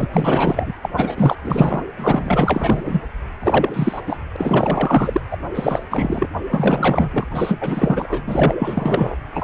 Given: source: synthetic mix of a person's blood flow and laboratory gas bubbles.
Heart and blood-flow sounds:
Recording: Doppler ultrasound of blood flow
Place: precordium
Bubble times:
0.00-0.10 s: bubbles
0.13-0.74 s: bubbles
0.82-0.89 s: bubbles
0.97-1.35 s: bubbles
1.44-1.83 s: bubbles
1.97-3.02 s: bubbles
3.43-4.01 s: bubbles
4.07-4.19 s: bubbles
4.34-5.21 s: bubbles
5.30-5.37 s: bubbles
5.54-5.83 s: bubbles
5.91-6.28 s: bubbles
6.50-7.25 s: bubbles
7.30-8.21 s: bubbles
8.27-8.54 s: bubbles
8.59-9.16 s: bubbles
9.33-9.44 s: bubbles
From the record:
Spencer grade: 4 (maximum detectable bubble signal sounding continuously throughout systole and diastole of every cardiac period, and overriding the amplitude of the normal cardiac signals)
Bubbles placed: anywhere in the cardiac cycle

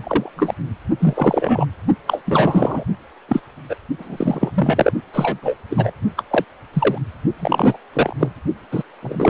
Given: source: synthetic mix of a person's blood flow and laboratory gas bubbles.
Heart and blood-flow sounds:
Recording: Doppler ultrasound of blood flow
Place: precordium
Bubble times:
0.04-0.30 s: bubbles
0.36-0.55 s: bubbles
1.00-1.65 s: bubbles
2.06-2.22 s: bubbles
2.25-2.84 s: bubbles
3.28-3.41 s: bubbles
3.69-3.75 s: bubbles
3.98-4.51 s: bubbles
4.54-4.91 s: bubbles
5.13-5.39 s: bubbles
5.41-5.56 s: bubbles
5.69-5.92 s: bubbles
6.16-6.23 s: bubbles
6.30-6.44 s: bubbles
6.73-6.98 s: bubbles
7.39-7.78 s: bubbles
7.93-8.13 s: bubbles
8.20-8.29 s: bubbles
8.71-8.83 s: bubbles
9.01-9.29 s: bubbles
From the record:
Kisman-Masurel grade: 243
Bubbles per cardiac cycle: several, 3 to 8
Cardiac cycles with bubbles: 100%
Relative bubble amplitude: loud (0.450 to 0.775)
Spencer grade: 3 (all of the cardiac periods contain showers or single bubble signals, but not dominating or overriding the cardiac motion signals)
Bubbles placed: only in the low amplitude regions of the cardiac cycle

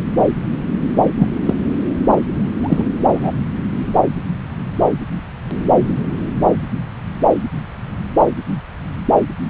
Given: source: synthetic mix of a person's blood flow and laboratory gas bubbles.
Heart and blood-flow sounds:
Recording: Doppler ultrasound of blood flow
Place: subclavian vein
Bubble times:
1.19-1.29 s: bubbles
1.46-1.54 s: bubbles
2.62-2.83 s: bubbles
3.13-3.31 s: bubbles
From the record:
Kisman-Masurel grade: 123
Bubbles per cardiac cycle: 1 to 2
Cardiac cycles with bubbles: 10 to 50%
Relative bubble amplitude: loud (0.450 to 0.775)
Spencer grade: 2 (many but less than half of the cardiac periods contain bubble signals, singularly or in groups)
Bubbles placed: anywhere in the cardiac cycle

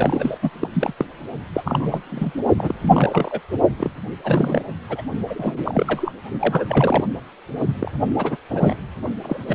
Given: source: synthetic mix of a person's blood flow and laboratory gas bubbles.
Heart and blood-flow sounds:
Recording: Doppler ultrasound of blood flow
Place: precordium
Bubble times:
0.00-0.38 s: bubbles
0.42-0.49 s: bubbles
0.59-0.69 s: bubbles
0.72-0.93 s: bubbles
0.97-1.05 s: bubbles
1.54-2.00 s: bubbles
2.06-2.32 s: bubbles
2.58-2.75 s: bubbles
2.83-3.40 s: bubbles
3.78-3.90 s: bubbles
4.23-4.62 s: bubbles
4.89-5.01 s: bubbles
5.27-6.12 s: bubbles
6.39-7.10 s: bubbles
7.59-7.64 s: bubbles
7.80-7.91 s: bubbles
8.09-8.37 s: bubbles
8.49-8.78 s: bubbles
9.23-9.38 s: bubbles
9.47-9.55 s: bubbles
From the record:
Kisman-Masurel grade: 342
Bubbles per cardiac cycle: rolling drumbeat, 9 or more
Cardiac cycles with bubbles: 100%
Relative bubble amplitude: moderate (0.250 to 0.450)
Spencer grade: 3 (all of the cardiac periods contain showers or single bubble signals, but not dominating or overriding the cardiac motion signals)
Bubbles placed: only in the low amplitude regions of the cardiac cycle

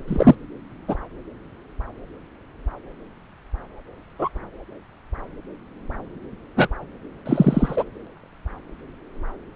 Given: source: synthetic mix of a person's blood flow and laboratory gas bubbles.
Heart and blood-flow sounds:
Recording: Doppler ultrasound of blood flow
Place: subclavian vein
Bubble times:
0.08-0.35 s: bubbles
0.88-0.96 s: bubbles
4.19-4.29 s: bubbles
6.56-6.69 s: bubbles
7.26-7.84 s: bubbles
From the record:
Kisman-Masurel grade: 123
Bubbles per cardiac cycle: 1 to 2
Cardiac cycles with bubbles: 10 to 50%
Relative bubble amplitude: loud (0.450 to 0.775)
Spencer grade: 2 (many but less than half of the cardiac periods contain bubble signals, singularly or in groups)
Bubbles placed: anywhere in the cardiac cycle

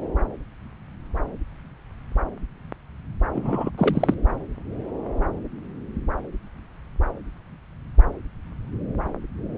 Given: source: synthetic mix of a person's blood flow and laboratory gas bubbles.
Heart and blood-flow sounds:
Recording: Doppler ultrasound of blood flow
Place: subclavian vein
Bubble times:
3.33-3.71 s: bubbles
3.77-4.14 s: bubbles
From the record:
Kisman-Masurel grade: 212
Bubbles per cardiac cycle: several, 3 to 8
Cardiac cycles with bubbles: 1 to 10%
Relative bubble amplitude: moderate (0.250 to 0.450)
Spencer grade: 1 (occasional bubble signal discernible with the cardiac motion signal, with majority of cardiac periods free of bubbles)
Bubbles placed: anywhere in the cardiac cycle

